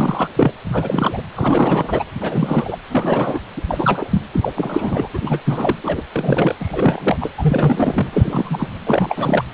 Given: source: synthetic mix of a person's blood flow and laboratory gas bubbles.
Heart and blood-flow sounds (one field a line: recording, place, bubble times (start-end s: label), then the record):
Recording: Doppler ultrasound of blood flow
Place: precordium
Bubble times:
0.00-0.31 s: bubbles
0.36-0.52 s: bubbles
0.65-1.21 s: bubbles
1.36-2.04 s: bubbles
2.21-2.78 s: bubbles
2.89-3.40 s: bubbles
3.56-3.62 s: bubbles
3.66-4.06 s: bubbles
4.11-4.21 s: bubbles
4.33-4.51 s: bubbles
4.55-5.08 s: bubbles
5.13-5.19 s: bubbles
5.21-5.42 s: bubbles
5.44-5.75 s: bubbles
5.83-6.02 s: bubbles
6.12-6.55 s: bubbles
6.60-7.17 s: bubbles
7.21-7.29 s: bubbles
7.38-8.68 s: bubbles
8.87-9.45 s: bubbles
From the record:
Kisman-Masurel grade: 342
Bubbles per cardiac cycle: rolling drumbeat, 9 or more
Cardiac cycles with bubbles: 100%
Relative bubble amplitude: moderate (0.250 to 0.450)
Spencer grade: 3 (all of the cardiac periods contain showers or single bubble signals, but not dominating or overriding the cardiac motion signals)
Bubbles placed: anywhere in the cardiac cycle